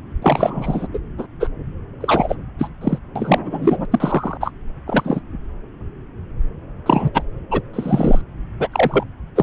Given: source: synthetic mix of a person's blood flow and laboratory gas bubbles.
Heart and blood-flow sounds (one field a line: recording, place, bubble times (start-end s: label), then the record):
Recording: Doppler ultrasound of blood flow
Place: subclavian vein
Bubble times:
0.22-0.87 s: bubbles
0.93-0.98 s: bubbles
1.18-1.28 s: bubbles
1.40-1.49 s: bubbles
2.00-2.35 s: bubbles
2.58-2.69 s: bubbles
2.81-2.98 s: bubbles
3.16-3.86 s: bubbles
3.92-4.38 s: bubbles
4.40-4.51 s: bubbles
4.87-5.21 s: bubbles
6.86-7.11 s: bubbles
7.13-7.23 s: bubbles
7.50-7.62 s: bubbles
7.73-8.21 s: bubbles
8.60-8.69 s: bubbles
8.71-9.04 s: bubbles
9.36-9.43 s: bubbles
From the record:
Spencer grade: 3 (all of the cardiac periods contain showers or single bubble signals, but not dominating or overriding the cardiac motion signals)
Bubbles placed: anywhere in the cardiac cycle